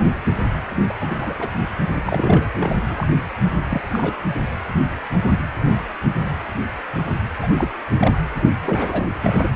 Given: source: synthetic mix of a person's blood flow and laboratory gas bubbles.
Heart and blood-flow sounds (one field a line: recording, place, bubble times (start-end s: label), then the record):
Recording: Doppler ultrasound of blood flow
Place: precordium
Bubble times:
0.89-0.94 s: bubbles
0.99-1.35 s: bubbles
1.38-1.48 s: bubbles
2.02-2.49 s: bubbles
2.59-3.07 s: bubbles
3.44-3.60 s: bubbles
3.69-3.81 s: bubbles
3.92-4.14 s: bubbles
7.42-7.47 s: bubbles
7.58-7.69 s: bubbles
7.95-8.18 s: bubbles
8.56-9.07 s: bubbles
9.23-9.51 s: bubbles
From the record:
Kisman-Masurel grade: 232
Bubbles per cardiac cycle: several, 3 to 8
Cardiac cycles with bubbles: 50 to 99%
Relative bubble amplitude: moderate (0.250 to 0.450)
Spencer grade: 3 (all of the cardiac periods contain showers or single bubble signals, but not dominating or overriding the cardiac motion signals)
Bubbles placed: anywhere in the cardiac cycle